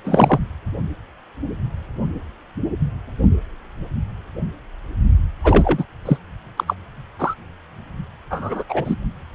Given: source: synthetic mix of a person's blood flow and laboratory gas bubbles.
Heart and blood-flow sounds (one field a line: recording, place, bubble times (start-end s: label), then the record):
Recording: Doppler ultrasound of blood flow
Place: precordium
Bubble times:
0.04-0.39 s: bubbles
5.44-5.84 s: bubbles
6.05-6.17 s: bubbles
6.57-6.64 s: bubbles
6.67-6.74 s: bubbles
7.19-7.35 s: bubbles
8.30-8.63 s: bubbles
8.69-8.96 s: bubbles
From the record:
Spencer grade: 2 (many but less than half of the cardiac periods contain bubble signals, singularly or in groups)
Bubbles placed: only in the low amplitude regions of the cardiac cycle